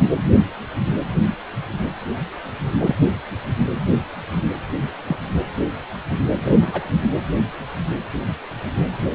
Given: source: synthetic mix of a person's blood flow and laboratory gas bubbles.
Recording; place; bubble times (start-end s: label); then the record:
Doppler ultrasound of blood flow; precordium
1.07-1.29 s: bubbles
2.79-2.95 s: bubbles
5.06-5.17 s: bubbles
6.43-6.89 s: bubbles
From the record:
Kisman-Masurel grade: 122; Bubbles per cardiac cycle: 1 to 2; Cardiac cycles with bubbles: 10 to 50%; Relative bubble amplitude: moderate (0.250 to 0.450); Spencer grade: 2 (many but less than half of the cardiac periods contain bubble signals, singularly or in groups); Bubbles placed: anywhere in the cardiac cycle